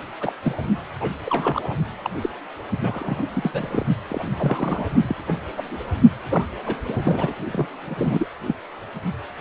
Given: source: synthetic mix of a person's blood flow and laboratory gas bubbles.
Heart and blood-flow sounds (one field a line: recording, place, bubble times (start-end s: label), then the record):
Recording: Doppler ultrasound of blood flow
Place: precordium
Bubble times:
0.21-0.33 s: bubbles
0.42-0.54 s: bubbles
1.00-1.10 s: bubbles
1.26-1.77 s: bubbles
2.04-2.09 s: bubbles
2.22-2.29 s: bubbles
2.81-3.25 s: bubbles
3.33-3.87 s: bubbles
4.08-4.86 s: bubbles
5.02-5.16 s: bubbles
5.26-5.38 s: bubbles
5.57-5.81 s: bubbles
6.31-6.45 s: bubbles
6.64-6.78 s: bubbles
6.87-7.36 s: bubbles
7.51-7.68 s: bubbles
7.86-8.28 s: bubbles
8.47-8.55 s: bubbles
From the record:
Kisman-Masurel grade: 242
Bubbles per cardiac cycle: several, 3 to 8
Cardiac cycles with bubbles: 100%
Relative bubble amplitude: moderate (0.250 to 0.450)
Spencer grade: 3 (all of the cardiac periods contain showers or single bubble signals, but not dominating or overriding the cardiac motion signals)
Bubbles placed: only in the low amplitude regions of the cardiac cycle